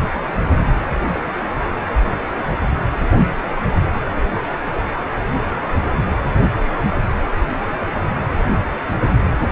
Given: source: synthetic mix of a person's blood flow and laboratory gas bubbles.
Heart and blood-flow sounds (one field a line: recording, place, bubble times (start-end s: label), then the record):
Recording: Doppler ultrasound of blood flow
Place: precordium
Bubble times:
1.13-1.20 s: bubbles
1.26-1.32 s: bubbles
From the record:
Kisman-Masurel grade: 111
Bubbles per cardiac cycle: 1 to 2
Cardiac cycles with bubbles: 1 to 10%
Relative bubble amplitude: barely perceptible (0.100 to 0.250)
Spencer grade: 1 (occasional bubble signal discernible with the cardiac motion signal, with majority of cardiac periods free of bubbles)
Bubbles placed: anywhere in the cardiac cycle